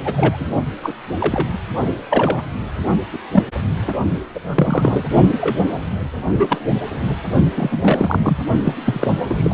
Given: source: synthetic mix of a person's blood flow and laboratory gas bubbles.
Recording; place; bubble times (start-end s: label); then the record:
Doppler ultrasound of blood flow; precordium
0.04-0.55 s: bubbles
0.83-0.93 s: bubbles
1.20-1.52 s: bubbles
2.10-2.43 s: bubbles
3.12-3.18 s: bubbles
3.31-3.44 s: bubbles
4.34-4.39 s: bubbles
4.54-5.05 s: bubbles
5.41-5.57 s: bubbles
6.31-6.47 s: bubbles
6.50-6.58 s: bubbles
7.56-8.44 s: bubbles
8.63-8.73 s: bubbles
8.85-9.07 s: bubbles
9.23-9.54 s: bubbles
From the record:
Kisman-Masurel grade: 242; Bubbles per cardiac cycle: several, 3 to 8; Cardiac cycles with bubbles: 100%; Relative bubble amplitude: moderate (0.250 to 0.450); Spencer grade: 3 (all of the cardiac periods contain showers or single bubble signals, but not dominating or overriding the cardiac motion signals); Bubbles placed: only in the low amplitude regions of the cardiac cycle